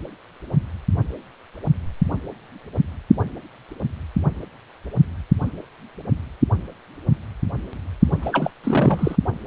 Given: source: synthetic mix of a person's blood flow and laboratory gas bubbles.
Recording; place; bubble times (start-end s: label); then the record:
Doppler ultrasound of blood flow; precordium
8.21-8.51 s: bubbles
8.63-9.16 s: bubbles
From the record:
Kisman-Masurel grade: 212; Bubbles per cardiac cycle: several, 3 to 8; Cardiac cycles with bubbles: 1 to 10%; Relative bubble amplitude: moderate (0.250 to 0.450); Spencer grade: 1 (occasional bubble signal discernible with the cardiac motion signal, with majority of cardiac periods free of bubbles); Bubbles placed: only in the low amplitude regions of the cardiac cycle